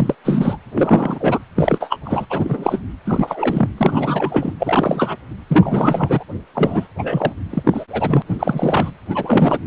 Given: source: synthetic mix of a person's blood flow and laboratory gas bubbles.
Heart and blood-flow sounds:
Doppler ultrasound of blood flow; precordium
0.00-0.15 s: bubbles
0.24-0.57 s: bubbles
0.74-1.39 s: bubbles
1.56-1.98 s: bubbles
2.04-2.25 s: bubbles
2.29-2.79 s: bubbles
3.05-3.67 s: bubbles
3.77-4.52 s: bubbles
4.60-5.16 s: bubbles
5.48-6.24 s: bubbles
6.54-6.87 s: bubbles
6.99-7.32 s: bubbles
7.50-7.85 s: bubbles
7.90-8.22 s: bubbles
8.29-8.92 s: bubbles
9.10-9.59 s: bubbles
From the record:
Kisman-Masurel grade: 343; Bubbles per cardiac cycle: rolling drumbeat, 9 or more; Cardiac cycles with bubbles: 100%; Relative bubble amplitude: loud (0.450 to 0.775); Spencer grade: 3 (all of the cardiac periods contain showers or single bubble signals, but not dominating or overriding the cardiac motion signals); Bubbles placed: anywhere in the cardiac cycle

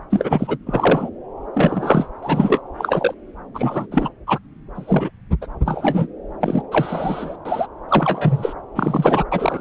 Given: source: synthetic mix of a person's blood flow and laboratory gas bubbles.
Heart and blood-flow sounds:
Doppler ultrasound of blood flow; subclavian vein
0.10-0.58 s: bubbles
0.66-1.10 s: bubbles
1.54-2.08 s: bubbles
2.23-2.62 s: bubbles
2.78-3.15 s: bubbles
3.54-3.87 s: bubbles
3.91-4.09 s: bubbles
4.27-4.38 s: bubbles
4.75-5.11 s: bubbles
5.42-5.47 s: bubbles
5.65-6.07 s: bubbles
6.40-6.62 s: bubbles
6.71-7.37 s: bubbles
7.45-7.67 s: bubbles
7.88-8.54 s: bubbles
8.75-9.24 s: bubbles
9.31-9.61 s: bubbles
From the record:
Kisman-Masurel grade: 243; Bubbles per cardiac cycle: several, 3 to 8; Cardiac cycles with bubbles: 100%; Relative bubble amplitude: loud (0.450 to 0.775); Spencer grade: 3 (all of the cardiac periods contain showers or single bubble signals, but not dominating or overriding the cardiac motion signals); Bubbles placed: anywhere in the cardiac cycle

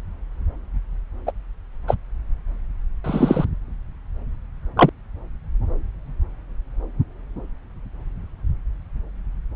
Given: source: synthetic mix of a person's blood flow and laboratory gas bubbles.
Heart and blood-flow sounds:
Doppler ultrasound of blood flow; subclavian vein
1.26-1.31 s: bubbles
1.87-1.95 s: bubbles
3.04-3.45 s: bubbles
4.76-4.90 s: bubbles
From the record:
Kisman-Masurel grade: 123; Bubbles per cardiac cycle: 1 to 2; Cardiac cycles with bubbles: 10 to 50%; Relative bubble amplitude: loud (0.450 to 0.775); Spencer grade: 2 (many but less than half of the cardiac periods contain bubble signals, singularly or in groups); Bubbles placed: anywhere in the cardiac cycle

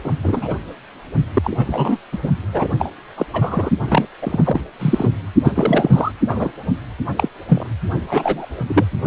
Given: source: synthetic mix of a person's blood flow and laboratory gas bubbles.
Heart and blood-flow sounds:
Doppler ultrasound of blood flow; precordium
0.05-0.12 s: bubbles
0.22-0.54 s: bubbles
1.34-1.97 s: bubbles
2.12-2.19 s: bubbles
2.22-2.29 s: bubbles
2.53-2.68 s: bubbles
2.79-2.91 s: bubbles
3.17-3.26 s: bubbles
3.33-3.70 s: bubbles
3.88-4.05 s: bubbles
4.21-4.63 s: bubbles
4.79-5.12 s: bubbles
5.44-6.12 s: bubbles
6.27-6.52 s: bubbles
7.16-7.29 s: bubbles
7.48-7.66 s: bubbles
8.08-8.46 s: bubbles
8.67-8.85 s: bubbles
From the record:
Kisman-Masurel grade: 243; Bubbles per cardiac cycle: several, 3 to 8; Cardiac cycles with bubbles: 100%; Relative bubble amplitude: loud (0.450 to 0.775); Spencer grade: 3 (all of the cardiac periods contain showers or single bubble signals, but not dominating or overriding the cardiac motion signals); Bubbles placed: only in the low amplitude regions of the cardiac cycle

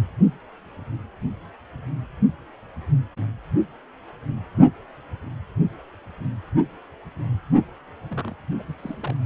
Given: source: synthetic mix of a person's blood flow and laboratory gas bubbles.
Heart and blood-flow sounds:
Doppler ultrasound of blood flow; precordium
8.11-8.34 s: bubbles
8.59-8.62 s: bubbles
8.67-8.73 s: bubbles
8.79-9.16 s: bubbles
From the record:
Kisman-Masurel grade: 211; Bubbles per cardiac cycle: several, 3 to 8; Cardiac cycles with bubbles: 1 to 10%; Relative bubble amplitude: barely perceptible (0.100 to 0.250); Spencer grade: 1 (occasional bubble signal discernible with the cardiac motion signal, with majority of cardiac periods free of bubbles); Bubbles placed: anywhere in the cardiac cycle

